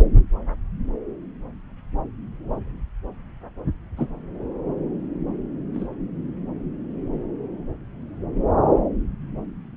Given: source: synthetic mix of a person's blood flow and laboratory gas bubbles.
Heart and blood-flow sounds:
Doppler ultrasound of blood flow; subclavian vein
3.97-4.09 s: bubbles
5.74-5.88 s: bubbles
From the record:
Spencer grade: 2 (many but less than half of the cardiac periods contain bubble signals, singularly or in groups); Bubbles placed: anywhere in the cardiac cycle

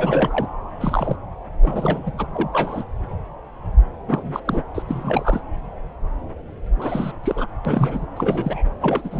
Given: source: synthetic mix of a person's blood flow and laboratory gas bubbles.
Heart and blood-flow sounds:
Doppler ultrasound of blood flow; subclavian vein
0.00-0.47 s: bubbles
0.80-1.17 s: bubbles
1.61-2.12 s: bubbles
2.18-2.27 s: bubbles
2.35-2.49 s: bubbles
2.53-2.83 s: bubbles
4.07-4.40 s: bubbles
4.46-4.63 s: bubbles
4.75-4.82 s: bubbles
4.88-5.41 s: bubbles
6.76-7.12 s: bubbles
7.23-7.46 s: bubbles
7.65-8.05 s: bubbles
8.17-8.75 s: bubbles
8.80-9.20 s: bubbles
From the record:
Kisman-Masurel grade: 332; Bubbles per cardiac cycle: rolling drumbeat, 9 or more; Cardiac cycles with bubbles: 50 to 99%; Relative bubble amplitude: moderate (0.250 to 0.450); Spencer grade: 3 (all of the cardiac periods contain showers or single bubble signals, but not dominating or overriding the cardiac motion signals); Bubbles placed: anywhere in the cardiac cycle

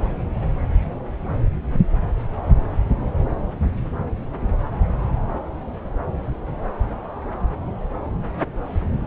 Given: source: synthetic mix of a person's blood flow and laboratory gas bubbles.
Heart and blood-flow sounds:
Doppler ultrasound of blood flow; subclavian vein
0.00-0.09 s: bubbles
From the record:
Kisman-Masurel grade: 211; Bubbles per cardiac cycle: several, 3 to 8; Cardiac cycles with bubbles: 1 to 10%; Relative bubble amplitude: barely perceptible (0.100 to 0.250); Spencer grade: 1 (occasional bubble signal discernible with the cardiac motion signal, with majority of cardiac periods free of bubbles); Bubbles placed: anywhere in the cardiac cycle

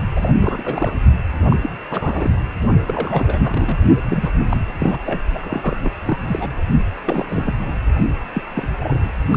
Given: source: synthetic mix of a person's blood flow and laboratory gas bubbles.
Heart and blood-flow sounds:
Doppler ultrasound of blood flow; precordium
0.11-0.32 s: bubbles
0.40-0.97 s: bubbles
1.50-1.57 s: bubbles
1.62-1.72 s: bubbles
1.91-2.34 s: bubbles
2.87-3.78 s: bubbles
4.04-4.30 s: bubbles
4.49-4.57 s: bubbles
4.67-5.00 s: bubbles
5.05-5.22 s: bubbles
5.34-5.78 s: bubbles
5.83-5.91 s: bubbles
6.05-6.18 s: bubbles
6.27-6.50 s: bubbles
7.05-7.53 s: bubbles
7.61-7.75 s: bubbles
8.33-8.43 s: bubbles
8.54-8.68 s: bubbles
8.79-9.10 s: bubbles
9.31-9.37 s: bubbles
From the record:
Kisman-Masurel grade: 342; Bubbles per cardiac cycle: rolling drumbeat, 9 or more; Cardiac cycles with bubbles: 100%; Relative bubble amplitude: moderate (0.250 to 0.450); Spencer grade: 3 (all of the cardiac periods contain showers or single bubble signals, but not dominating or overriding the cardiac motion signals); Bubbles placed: only in the low amplitude regions of the cardiac cycle

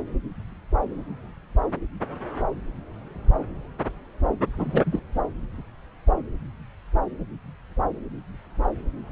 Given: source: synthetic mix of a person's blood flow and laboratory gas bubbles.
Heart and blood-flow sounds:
Doppler ultrasound of blood flow; subclavian vein
4.57-5.00 s: bubbles
From the record:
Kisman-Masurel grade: 222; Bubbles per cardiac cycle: several, 3 to 8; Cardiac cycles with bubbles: 10 to 50%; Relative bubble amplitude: moderate (0.250 to 0.450); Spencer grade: 2 (many but less than half of the cardiac periods contain bubble signals, singularly or in groups); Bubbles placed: anywhere in the cardiac cycle

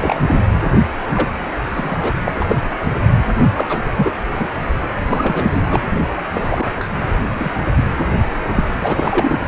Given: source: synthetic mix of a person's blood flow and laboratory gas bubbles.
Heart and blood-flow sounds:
Doppler ultrasound of blood flow; precordium
0.00-0.20 s: bubbles
0.27-0.41 s: bubbles
1.15-1.28 s: bubbles
1.75-1.98 s: bubbles
2.00-2.14 s: bubbles
2.25-2.33 s: bubbles
2.40-2.56 s: bubbles
3.54-3.78 s: bubbles
3.95-4.11 s: bubbles
4.35-4.48 s: bubbles
4.99-5.50 s: bubbles
5.53-5.64 s: bubbles
5.70-5.81 s: bubbles
6.33-6.67 s: bubbles
6.76-6.90 s: bubbles
7.23-7.51 s: bubbles
7.76-7.83 s: bubbles
8.48-9.38 s: bubbles
From the record:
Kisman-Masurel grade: 242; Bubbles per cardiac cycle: several, 3 to 8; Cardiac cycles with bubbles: 100%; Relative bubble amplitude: moderate (0.250 to 0.450); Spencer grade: 3 (all of the cardiac periods contain showers or single bubble signals, but not dominating or overriding the cardiac motion signals); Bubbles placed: anywhere in the cardiac cycle

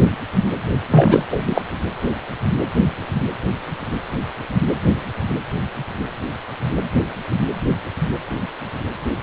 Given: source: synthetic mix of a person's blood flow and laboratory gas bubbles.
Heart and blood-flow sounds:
Doppler ultrasound of blood flow; precordium
0.91-1.25 s: bubbles
1.30-1.43 s: bubbles
1.46-1.62 s: bubbles
From the record:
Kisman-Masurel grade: 213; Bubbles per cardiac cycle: several, 3 to 8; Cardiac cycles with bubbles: 1 to 10%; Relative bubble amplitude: loud (0.450 to 0.775); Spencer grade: 1 (occasional bubble signal discernible with the cardiac motion signal, with majority of cardiac periods free of bubbles); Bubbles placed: anywhere in the cardiac cycle

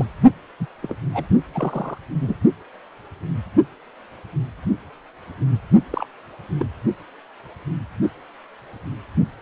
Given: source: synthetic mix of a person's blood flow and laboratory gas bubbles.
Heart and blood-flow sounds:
Doppler ultrasound of blood flow; precordium
0.00-0.06 s: bubbles
0.60-0.66 s: bubbles
0.83-0.95 s: bubbles
1.13-1.25 s: bubbles
1.53-1.98 s: bubbles
2.18-2.35 s: bubbles
5.90-6.06 s: bubbles
6.59-6.65 s: bubbles
From the record:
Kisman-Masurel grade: 222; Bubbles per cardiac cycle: several, 3 to 8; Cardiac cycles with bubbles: 10 to 50%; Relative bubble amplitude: moderate (0.250 to 0.450); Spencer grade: 2 (many but less than half of the cardiac periods contain bubble signals, singularly or in groups); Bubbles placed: only in the low amplitude regions of the cardiac cycle

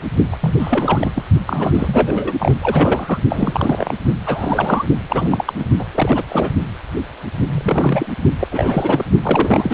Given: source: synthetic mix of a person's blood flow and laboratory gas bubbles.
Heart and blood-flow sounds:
Doppler ultrasound of blood flow; precordium
0.32-0.36 s: bubbles
0.41-1.10 s: bubbles
1.15-1.23 s: bubbles
1.46-2.33 s: bubbles
2.39-2.58 s: bubbles
2.62-3.18 s: bubbles
3.29-3.93 s: bubbles
4.26-4.85 s: bubbles
5.09-5.53 s: bubbles
5.59-5.65 s: bubbles
5.79-5.85 s: bubbles
5.95-6.23 s: bubbles
6.28-6.50 s: bubbles
7.49-8.14 s: bubbles
8.39-8.47 s: bubbles
8.51-9.05 s: bubbles
9.21-9.73 s: bubbles
From the record:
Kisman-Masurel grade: 332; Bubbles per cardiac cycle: rolling drumbeat, 9 or more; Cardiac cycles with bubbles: 50 to 99%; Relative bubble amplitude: moderate (0.250 to 0.450); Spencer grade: 3 (all of the cardiac periods contain showers or single bubble signals, but not dominating or overriding the cardiac motion signals); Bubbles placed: only in the low amplitude regions of the cardiac cycle

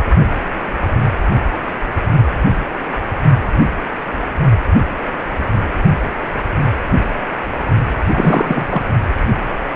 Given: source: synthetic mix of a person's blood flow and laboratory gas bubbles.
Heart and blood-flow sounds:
Doppler ultrasound of blood flow; precordium
8.12-8.82 s: bubbles
From the record:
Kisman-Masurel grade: 213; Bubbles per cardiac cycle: several, 3 to 8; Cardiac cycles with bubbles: 1 to 10%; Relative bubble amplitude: loud (0.450 to 0.775); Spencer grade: 1 (occasional bubble signal discernible with the cardiac motion signal, with majority of cardiac periods free of bubbles); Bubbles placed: only in the low amplitude regions of the cardiac cycle

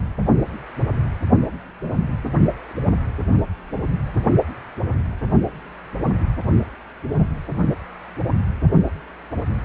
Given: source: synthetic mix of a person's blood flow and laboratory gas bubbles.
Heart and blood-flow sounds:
Doppler ultrasound of blood flow; precordium
no bubbles
From the record:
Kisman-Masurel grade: 000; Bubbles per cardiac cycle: 0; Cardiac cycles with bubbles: 0%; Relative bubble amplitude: no bubbles discernible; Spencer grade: 0 (complete lack of bubble signals)

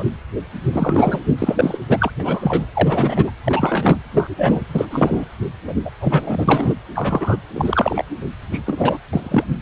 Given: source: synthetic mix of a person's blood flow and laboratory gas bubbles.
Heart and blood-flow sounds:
Doppler ultrasound of blood flow; precordium
0.00-0.04 s: bubbles
0.72-1.19 s: bubbles
1.39-1.79 s: bubbles
1.89-2.10 s: bubbles
2.19-2.65 s: bubbles
2.73-3.31 s: bubbles
3.44-4.00 s: bubbles
4.11-4.35 s: bubbles
4.38-4.65 s: bubbles
4.71-4.85 s: bubbles
4.89-5.24 s: bubbles
5.67-5.74 s: bubbles
5.84-5.90 s: bubbles
6.00-6.75 s: bubbles
6.94-7.37 s: bubbles
7.53-8.04 s: bubbles
8.51-8.61 s: bubbles
8.66-8.98 s: bubbles
9.13-9.44 s: bubbles
From the record:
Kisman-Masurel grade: 243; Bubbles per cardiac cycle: several, 3 to 8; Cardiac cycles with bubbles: 100%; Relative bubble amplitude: loud (0.450 to 0.775); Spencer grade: 3 (all of the cardiac periods contain showers or single bubble signals, but not dominating or overriding the cardiac motion signals); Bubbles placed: anywhere in the cardiac cycle

